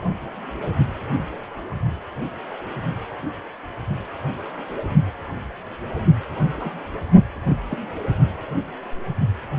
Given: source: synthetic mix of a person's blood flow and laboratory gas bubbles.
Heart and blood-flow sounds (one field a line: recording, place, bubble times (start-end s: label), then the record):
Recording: Doppler ultrasound of blood flow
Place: precordium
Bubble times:
6.60-6.75 s: bubbles
7.49-7.56 s: bubbles
7.69-7.78 s: bubbles
From the record:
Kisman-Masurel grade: 211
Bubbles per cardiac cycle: several, 3 to 8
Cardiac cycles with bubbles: 1 to 10%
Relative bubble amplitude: barely perceptible (0.100 to 0.250)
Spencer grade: 1 (occasional bubble signal discernible with the cardiac motion signal, with majority of cardiac periods free of bubbles)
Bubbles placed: anywhere in the cardiac cycle